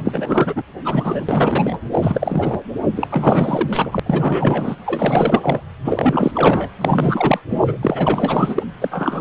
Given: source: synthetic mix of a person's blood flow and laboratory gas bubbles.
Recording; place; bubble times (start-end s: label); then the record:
Doppler ultrasound of blood flow; precordium
0.04-0.63 s: bubbles
0.85-1.25 s: bubbles
1.29-1.79 s: bubbles
1.91-2.62 s: bubbles
2.96-3.08 s: bubbles
3.10-4.00 s: bubbles
4.06-4.75 s: bubbles
4.86-5.61 s: bubbles
5.84-6.32 s: bubbles
6.34-6.69 s: bubbles
6.81-7.42 s: bubbles
7.48-7.77 s: bubbles
7.82-8.63 s: bubbles
8.81-9.21 s: bubbles
From the record:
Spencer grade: 4 (maximum detectable bubble signal sounding continuously throughout systole and diastole of every cardiac period, and overriding the amplitude of the normal cardiac signals); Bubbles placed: anywhere in the cardiac cycle